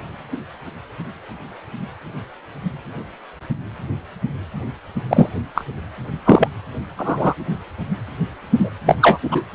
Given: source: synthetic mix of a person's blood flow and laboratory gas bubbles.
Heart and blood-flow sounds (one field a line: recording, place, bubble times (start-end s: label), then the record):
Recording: Doppler ultrasound of blood flow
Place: precordium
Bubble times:
5.08-5.29 s: bubbles
5.54-5.66 s: bubbles
6.25-6.48 s: bubbles
6.97-7.34 s: bubbles
8.58-8.70 s: bubbles
8.86-8.97 s: bubbles
9.01-9.18 s: bubbles
9.30-9.42 s: bubbles
From the record:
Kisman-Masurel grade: 223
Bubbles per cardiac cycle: several, 3 to 8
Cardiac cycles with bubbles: 10 to 50%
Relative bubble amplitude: loud (0.450 to 0.775)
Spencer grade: 2 (many but less than half of the cardiac periods contain bubble signals, singularly or in groups)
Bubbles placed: only in the low amplitude regions of the cardiac cycle